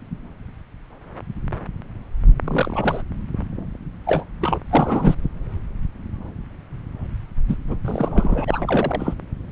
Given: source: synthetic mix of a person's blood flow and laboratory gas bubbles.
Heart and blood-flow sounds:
Doppler ultrasound of blood flow; subclavian vein
2.44-3.02 s: bubbles
4.06-4.24 s: bubbles
4.41-4.60 s: bubbles
4.70-5.15 s: bubbles
7.49-7.56 s: bubbles
7.68-7.75 s: bubbles
7.85-8.45 s: bubbles
8.47-9.14 s: bubbles
From the record:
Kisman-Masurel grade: 222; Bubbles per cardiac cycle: several, 3 to 8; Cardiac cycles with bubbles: 10 to 50%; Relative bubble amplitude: moderate (0.250 to 0.450); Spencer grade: 2 (many but less than half of the cardiac periods contain bubble signals, singularly or in groups); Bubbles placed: anywhere in the cardiac cycle

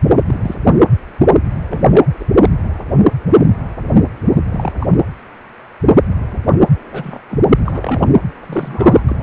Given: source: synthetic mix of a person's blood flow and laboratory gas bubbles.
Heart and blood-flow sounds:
Doppler ultrasound of blood flow; precordium
0.27-0.55 s: bubbles
1.69-1.84 s: bubbles
1.89-2.05 s: bubbles
2.19-2.25 s: bubbles
2.42-2.50 s: bubbles
4.49-4.72 s: bubbles
4.80-4.88 s: bubbles
6.92-7.18 s: bubbles
7.29-7.39 s: bubbles
7.65-8.08 s: bubbles
8.40-9.03 s: bubbles
9.09-9.16 s: bubbles
9.19-9.23 s: bubbles
From the record:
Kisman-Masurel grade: 232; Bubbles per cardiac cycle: several, 3 to 8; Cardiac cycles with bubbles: 50 to 99%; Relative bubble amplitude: moderate (0.250 to 0.450); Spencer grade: 3 (all of the cardiac periods contain showers or single bubble signals, but not dominating or overriding the cardiac motion signals); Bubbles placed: anywhere in the cardiac cycle

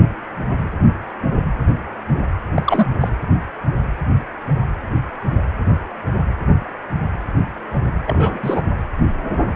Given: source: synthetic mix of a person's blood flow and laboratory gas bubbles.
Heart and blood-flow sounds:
Doppler ultrasound of blood flow; precordium
2.54-2.86 s: bubbles
2.99-3.09 s: bubbles
8.06-8.62 s: bubbles
From the record:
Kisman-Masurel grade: 222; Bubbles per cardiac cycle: several, 3 to 8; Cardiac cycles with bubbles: 10 to 50%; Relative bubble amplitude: moderate (0.250 to 0.450); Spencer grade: 2 (many but less than half of the cardiac periods contain bubble signals, singularly or in groups); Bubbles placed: anywhere in the cardiac cycle

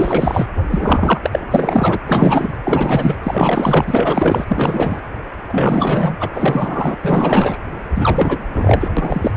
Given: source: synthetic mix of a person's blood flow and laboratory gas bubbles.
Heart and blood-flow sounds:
Doppler ultrasound of blood flow; precordium
0.00-0.47 s: bubbles
0.71-1.44 s: bubbles
1.51-2.00 s: bubbles
2.06-2.57 s: bubbles
2.64-3.16 s: bubbles
3.23-4.45 s: bubbles
4.47-5.00 s: bubbles
5.48-6.15 s: bubbles
6.20-6.30 s: bubbles
6.34-6.98 s: bubbles
7.04-7.58 s: bubbles
7.95-8.88 s: bubbles
8.96-9.37 s: bubbles
From the record:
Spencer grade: 4 (maximum detectable bubble signal sounding continuously throughout systole and diastole of every cardiac period, and overriding the amplitude of the normal cardiac signals); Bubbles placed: anywhere in the cardiac cycle

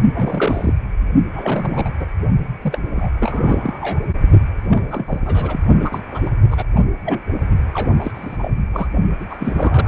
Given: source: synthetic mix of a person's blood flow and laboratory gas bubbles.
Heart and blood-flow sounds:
Doppler ultrasound of blood flow; precordium
0.14-0.73 s: bubbles
1.33-1.91 s: bubbles
2.00-2.06 s: bubbles
2.62-2.79 s: bubbles
2.96-3.10 s: bubbles
3.19-4.00 s: bubbles
4.70-5.21 s: bubbles
5.25-5.60 s: bubbles
5.80-6.03 s: bubbles
6.08-6.30 s: bubbles
6.50-6.64 s: bubbles
6.75-6.79 s: bubbles
7.04-7.21 s: bubbles
7.73-7.93 s: bubbles
7.98-8.12 s: bubbles
8.15-8.53 s: bubbles
8.73-8.88 s: bubbles
9.20-9.25 s: bubbles
9.29-9.37 s: bubbles
9.40-9.87 s: bubbles
From the record:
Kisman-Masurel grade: 342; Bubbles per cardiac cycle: rolling drumbeat, 9 or more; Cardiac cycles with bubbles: 100%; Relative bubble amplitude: moderate (0.250 to 0.450); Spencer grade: 3 (all of the cardiac periods contain showers or single bubble signals, but not dominating or overriding the cardiac motion signals); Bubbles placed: only in the low amplitude regions of the cardiac cycle

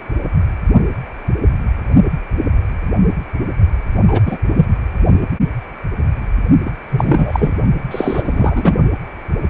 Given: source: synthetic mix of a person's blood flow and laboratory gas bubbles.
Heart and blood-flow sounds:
Doppler ultrasound of blood flow; precordium
4.08-4.21 s: bubbles
4.25-4.38 s: bubbles
4.55-4.67 s: bubbles
6.66-6.72 s: bubbles
6.91-7.54 s: bubbles
7.91-8.74 s: bubbles
From the record:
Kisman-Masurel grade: 223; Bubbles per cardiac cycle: several, 3 to 8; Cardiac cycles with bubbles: 10 to 50%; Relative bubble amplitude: loud (0.450 to 0.775); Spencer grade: 2 (many but less than half of the cardiac periods contain bubble signals, singularly or in groups); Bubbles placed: only in the low amplitude regions of the cardiac cycle

